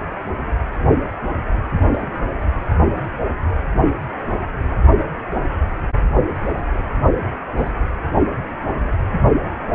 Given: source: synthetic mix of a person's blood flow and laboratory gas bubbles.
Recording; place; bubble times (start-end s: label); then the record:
Doppler ultrasound of blood flow; precordium
1.92-2.26 s: bubbles
6.12-6.66 s: bubbles
7.57-7.71 s: bubbles
From the record:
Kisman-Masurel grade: 121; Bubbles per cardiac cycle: 1 to 2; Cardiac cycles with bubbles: 10 to 50%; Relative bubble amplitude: barely perceptible (0.100 to 0.250); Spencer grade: 2 (many but less than half of the cardiac periods contain bubble signals, singularly or in groups); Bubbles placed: only in the low amplitude regions of the cardiac cycle